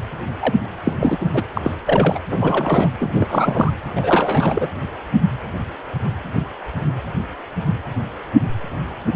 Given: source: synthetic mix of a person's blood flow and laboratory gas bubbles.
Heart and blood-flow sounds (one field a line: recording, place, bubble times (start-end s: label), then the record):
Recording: Doppler ultrasound of blood flow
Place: precordium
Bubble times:
0.00-0.03 s: bubbles
0.39-0.60 s: bubbles
0.83-0.93 s: bubbles
1.00-1.27 s: bubbles
1.34-1.44 s: bubbles
1.54-1.61 s: bubbles
1.64-1.74 s: bubbles
1.86-2.19 s: bubbles
2.30-2.89 s: bubbles
2.98-3.27 s: bubbles
3.30-3.73 s: bubbles
3.95-4.69 s: bubbles
From the record:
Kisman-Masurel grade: 332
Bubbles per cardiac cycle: rolling drumbeat, 9 or more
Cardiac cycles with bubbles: 50 to 99%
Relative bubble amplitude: moderate (0.250 to 0.450)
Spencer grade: 3 (all of the cardiac periods contain showers or single bubble signals, but not dominating or overriding the cardiac motion signals)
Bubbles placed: anywhere in the cardiac cycle